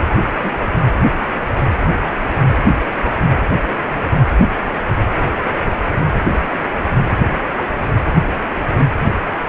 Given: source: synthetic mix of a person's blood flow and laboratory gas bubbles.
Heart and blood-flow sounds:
Doppler ultrasound of blood flow; precordium
0.39-0.50 s: bubbles
From the record:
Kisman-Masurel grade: 112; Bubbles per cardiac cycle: 1 to 2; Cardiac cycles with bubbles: 1 to 10%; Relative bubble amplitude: moderate (0.250 to 0.450); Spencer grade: 1 (occasional bubble signal discernible with the cardiac motion signal, with majority of cardiac periods free of bubbles); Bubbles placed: anywhere in the cardiac cycle

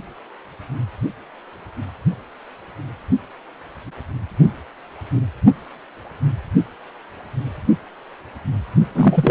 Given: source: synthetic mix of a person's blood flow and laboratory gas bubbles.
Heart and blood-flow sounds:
Doppler ultrasound of blood flow; precordium
8.95-9.31 s: bubbles
From the record:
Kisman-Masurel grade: 113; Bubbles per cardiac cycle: 1 to 2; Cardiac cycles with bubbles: 1 to 10%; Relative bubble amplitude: loud (0.450 to 0.775); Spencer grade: 1 (occasional bubble signal discernible with the cardiac motion signal, with majority of cardiac periods free of bubbles); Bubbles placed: only in the low amplitude regions of the cardiac cycle

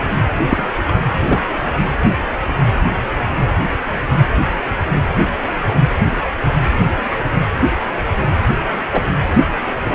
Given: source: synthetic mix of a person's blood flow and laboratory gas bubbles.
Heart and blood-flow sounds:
Doppler ultrasound of blood flow; precordium
0.00-0.03 s: bubbles
0.49-0.64 s: bubbles
0.88-0.91 s: bubbles
1.26-1.40 s: bubbles
8.93-9.02 s: bubbles
9.84-9.95 s: bubbles
From the record:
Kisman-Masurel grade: 123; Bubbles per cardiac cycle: 1 to 2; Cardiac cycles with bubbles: 10 to 50%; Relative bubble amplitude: loud (0.450 to 0.775); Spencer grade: 2 (many but less than half of the cardiac periods contain bubble signals, singularly or in groups); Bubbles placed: anywhere in the cardiac cycle

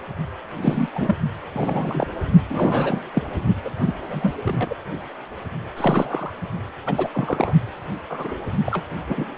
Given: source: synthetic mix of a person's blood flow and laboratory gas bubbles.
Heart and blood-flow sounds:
Doppler ultrasound of blood flow; precordium
0.62-0.89 s: bubbles
0.95-1.16 s: bubbles
1.54-2.07 s: bubbles
2.49-3.02 s: bubbles
3.14-3.23 s: bubbles
3.65-3.70 s: bubbles
3.83-3.92 s: bubbles
4.10-4.31 s: bubbles
4.45-4.75 s: bubbles
5.76-6.31 s: bubbles
6.86-7.09 s: bubbles
7.13-7.54 s: bubbles
8.10-8.34 s: bubbles
8.65-8.85 s: bubbles
9.09-9.25 s: bubbles
From the record:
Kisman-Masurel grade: 242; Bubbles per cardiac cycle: several, 3 to 8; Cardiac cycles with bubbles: 100%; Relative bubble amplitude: moderate (0.250 to 0.450); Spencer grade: 3 (all of the cardiac periods contain showers or single bubble signals, but not dominating or overriding the cardiac motion signals); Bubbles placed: only in the low amplitude regions of the cardiac cycle

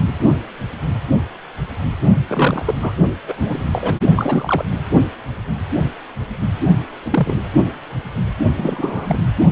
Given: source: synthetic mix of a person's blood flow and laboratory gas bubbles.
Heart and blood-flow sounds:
Doppler ultrasound of blood flow; precordium
2.27-2.63 s: bubbles
2.66-2.75 s: bubbles
2.81-2.93 s: bubbles
3.27-3.35 s: bubbles
3.39-3.65 s: bubbles
3.71-3.94 s: bubbles
4.16-4.63 s: bubbles
7.05-7.36 s: bubbles
8.57-9.21 s: bubbles
From the record:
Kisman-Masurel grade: 222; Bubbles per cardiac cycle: several, 3 to 8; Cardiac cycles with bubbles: 10 to 50%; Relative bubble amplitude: moderate (0.250 to 0.450); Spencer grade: 2 (many but less than half of the cardiac periods contain bubble signals, singularly or in groups); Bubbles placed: only in the low amplitude regions of the cardiac cycle

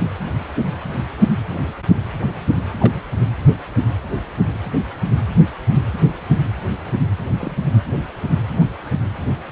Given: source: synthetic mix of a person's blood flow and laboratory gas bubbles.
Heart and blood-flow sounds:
Doppler ultrasound of blood flow; precordium
0.00-0.09 s: bubbles
1.53-1.58 s: bubbles
2.80-3.01 s: bubbles
7.30-7.52 s: bubbles
8.60-8.66 s: bubbles
From the record:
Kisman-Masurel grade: 122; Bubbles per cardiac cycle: 1 to 2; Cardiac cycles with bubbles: 10 to 50%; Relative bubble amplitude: moderate (0.250 to 0.450); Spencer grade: 2 (many but less than half of the cardiac periods contain bubble signals, singularly or in groups); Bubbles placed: anywhere in the cardiac cycle

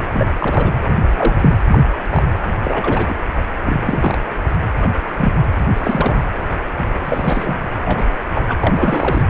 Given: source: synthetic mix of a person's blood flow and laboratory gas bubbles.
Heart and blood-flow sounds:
Doppler ultrasound of blood flow; precordium
0.12-0.27 s: bubbles
0.40-0.70 s: bubbles
1.17-1.35 s: bubbles
1.39-1.50 s: bubbles
1.68-1.84 s: bubbles
1.93-1.97 s: bubbles
2.09-2.22 s: bubbles
2.63-3.16 s: bubbles
3.65-4.17 s: bubbles
4.81-4.89 s: bubbles
5.16-5.33 s: bubbles
5.76-6.21 s: bubbles
6.75-6.84 s: bubbles
7.04-7.59 s: bubbles
7.83-8.10 s: bubbles
8.34-8.57 s: bubbles
8.61-9.23 s: bubbles
From the record:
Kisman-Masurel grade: 242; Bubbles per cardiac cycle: several, 3 to 8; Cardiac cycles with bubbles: 100%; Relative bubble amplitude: moderate (0.250 to 0.450); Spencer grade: 3 (all of the cardiac periods contain showers or single bubble signals, but not dominating or overriding the cardiac motion signals); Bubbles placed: anywhere in the cardiac cycle

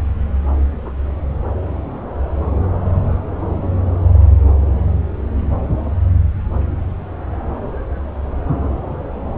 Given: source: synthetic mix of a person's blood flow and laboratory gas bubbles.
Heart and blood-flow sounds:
Doppler ultrasound of blood flow; subclavian vein
0.84-1.08 s: bubbles
From the record:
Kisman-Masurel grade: 111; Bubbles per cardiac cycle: 1 to 2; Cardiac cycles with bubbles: 1 to 10%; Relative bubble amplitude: barely perceptible (0.100 to 0.250); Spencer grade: 1 (occasional bubble signal discernible with the cardiac motion signal, with majority of cardiac periods free of bubbles); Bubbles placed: anywhere in the cardiac cycle

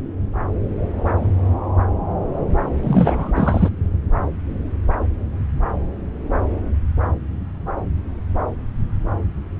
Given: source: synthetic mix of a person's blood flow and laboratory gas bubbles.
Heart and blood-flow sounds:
Doppler ultrasound of blood flow; subclavian vein
2.83-3.31 s: bubbles
3.34-3.69 s: bubbles
From the record:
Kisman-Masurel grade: 223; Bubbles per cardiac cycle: several, 3 to 8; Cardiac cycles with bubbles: 10 to 50%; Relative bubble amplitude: loud (0.450 to 0.775); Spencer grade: 2 (many but less than half of the cardiac periods contain bubble signals, singularly or in groups); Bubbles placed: anywhere in the cardiac cycle

